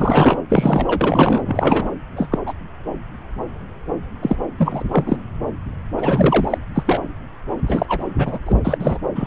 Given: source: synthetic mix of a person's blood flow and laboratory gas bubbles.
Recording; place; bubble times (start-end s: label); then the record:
Doppler ultrasound of blood flow; subclavian vein
0.00-0.37 s: bubbles
0.49-1.91 s: bubbles
2.15-2.38 s: bubbles
2.46-2.53 s: bubbles
4.22-4.36 s: bubbles
4.58-4.83 s: bubbles
4.92-5.17 s: bubbles
5.97-6.58 s: bubbles
6.75-7.01 s: bubbles
7.67-8.05 s: bubbles
8.18-8.38 s: bubbles
8.46-8.55 s: bubbles
8.64-8.98 s: bubbles
9.14-9.27 s: bubbles
From the record:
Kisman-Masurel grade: 233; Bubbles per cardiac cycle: several, 3 to 8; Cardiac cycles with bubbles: 50 to 99%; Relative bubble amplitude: loud (0.450 to 0.775); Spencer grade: 3 (all of the cardiac periods contain showers or single bubble signals, but not dominating or overriding the cardiac motion signals); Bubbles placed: anywhere in the cardiac cycle